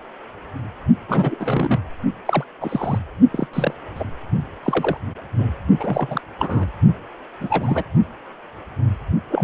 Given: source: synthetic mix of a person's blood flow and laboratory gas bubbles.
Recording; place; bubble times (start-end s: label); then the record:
Doppler ultrasound of blood flow; precordium
1.08-1.80 s: bubbles
2.25-2.45 s: bubbles
2.60-2.99 s: bubbles
3.31-3.48 s: bubbles
3.53-3.74 s: bubbles
3.95-4.04 s: bubbles
4.62-4.98 s: bubbles
5.38-5.48 s: bubbles
5.79-6.21 s: bubbles
6.39-6.65 s: bubbles
7.41-7.84 s: bubbles
9.30-9.43 s: bubbles
From the record:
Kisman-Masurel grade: 232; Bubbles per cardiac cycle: several, 3 to 8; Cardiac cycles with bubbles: 50 to 99%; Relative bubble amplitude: moderate (0.250 to 0.450); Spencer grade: 3 (all of the cardiac periods contain showers or single bubble signals, but not dominating or overriding the cardiac motion signals); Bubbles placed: only in the low amplitude regions of the cardiac cycle